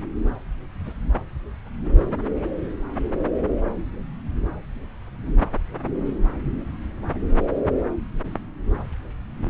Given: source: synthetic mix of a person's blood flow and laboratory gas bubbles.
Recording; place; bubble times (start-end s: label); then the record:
Doppler ultrasound of blood flow; subclavian vein
0.85-0.93 s: bubbles
From the record:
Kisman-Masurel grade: 111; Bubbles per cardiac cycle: 1 to 2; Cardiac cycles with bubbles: 1 to 10%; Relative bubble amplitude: barely perceptible (0.100 to 0.250); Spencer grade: 1 (occasional bubble signal discernible with the cardiac motion signal, with majority of cardiac periods free of bubbles); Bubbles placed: anywhere in the cardiac cycle